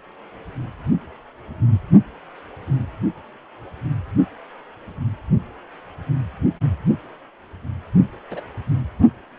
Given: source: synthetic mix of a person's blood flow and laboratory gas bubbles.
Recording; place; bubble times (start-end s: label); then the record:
Doppler ultrasound of blood flow; precordium
8.30-8.40 s: bubbles
From the record:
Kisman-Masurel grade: 111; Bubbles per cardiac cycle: 1 to 2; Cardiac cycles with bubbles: 1 to 10%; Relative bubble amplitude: barely perceptible (0.100 to 0.250); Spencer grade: 1 (occasional bubble signal discernible with the cardiac motion signal, with majority of cardiac periods free of bubbles); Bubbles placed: only in the low amplitude regions of the cardiac cycle